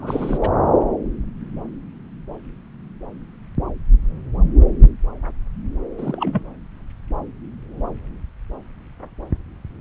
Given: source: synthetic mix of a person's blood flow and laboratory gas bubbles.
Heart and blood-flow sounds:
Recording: Doppler ultrasound of blood flow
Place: subclavian vein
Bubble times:
0.00-0.38 s: bubbles
0.41-0.50 s: bubbles
5.98-6.43 s: bubbles
From the record:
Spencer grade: 1 (occasional bubble signal discernible with the cardiac motion signal, with majority of cardiac periods free of bubbles)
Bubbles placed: anywhere in the cardiac cycle

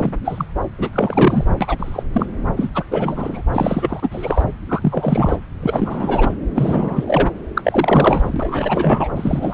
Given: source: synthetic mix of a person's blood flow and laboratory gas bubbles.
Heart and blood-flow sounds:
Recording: Doppler ultrasound of blood flow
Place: subclavian vein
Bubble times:
0.00-0.12 s: bubbles
0.25-0.46 s: bubbles
0.78-0.89 s: bubbles
0.92-1.45 s: bubbles
1.60-2.03 s: bubbles
2.12-2.26 s: bubbles
2.56-2.69 s: bubbles
2.74-2.84 s: bubbles
2.90-3.42 s: bubbles
3.52-4.45 s: bubbles
4.68-5.37 s: bubbles
5.60-6.35 s: bubbles
6.55-7.04 s: bubbles
7.07-7.30 s: bubbles
7.54-7.62 s: bubbles
7.64-9.08 s: bubbles
9.15-9.54 s: bubbles
From the record:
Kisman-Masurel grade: 343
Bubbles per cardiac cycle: rolling drumbeat, 9 or more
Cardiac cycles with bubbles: 100%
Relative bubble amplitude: loud (0.450 to 0.775)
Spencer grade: 3 (all of the cardiac periods contain showers or single bubble signals, but not dominating or overriding the cardiac motion signals)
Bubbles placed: anywhere in the cardiac cycle

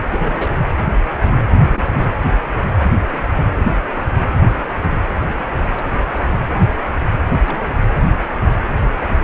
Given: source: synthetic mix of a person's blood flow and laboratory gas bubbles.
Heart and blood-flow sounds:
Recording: Doppler ultrasound of blood flow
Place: precordium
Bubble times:
0.11-0.57 s: bubbles
1.62-2.08 s: bubbles
5.19-5.35 s: bubbles
5.75-5.85 s: bubbles
7.26-7.41 s: bubbles
7.46-7.79 s: bubbles
From the record:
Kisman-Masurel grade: 221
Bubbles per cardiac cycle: several, 3 to 8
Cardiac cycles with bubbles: 10 to 50%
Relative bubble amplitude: barely perceptible (0.100 to 0.250)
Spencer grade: 2 (many but less than half of the cardiac periods contain bubble signals, singularly or in groups)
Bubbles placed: anywhere in the cardiac cycle

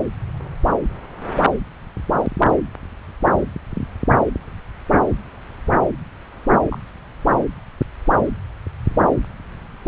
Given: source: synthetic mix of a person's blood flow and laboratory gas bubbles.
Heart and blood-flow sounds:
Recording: Doppler ultrasound of blood flow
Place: subclavian vein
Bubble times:
6.70-6.79 s: bubbles
From the record:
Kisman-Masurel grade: 111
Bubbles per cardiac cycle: 1 to 2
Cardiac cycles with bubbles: 1 to 10%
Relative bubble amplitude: barely perceptible (0.100 to 0.250)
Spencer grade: 1 (occasional bubble signal discernible with the cardiac motion signal, with majority of cardiac periods free of bubbles)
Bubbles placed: anywhere in the cardiac cycle

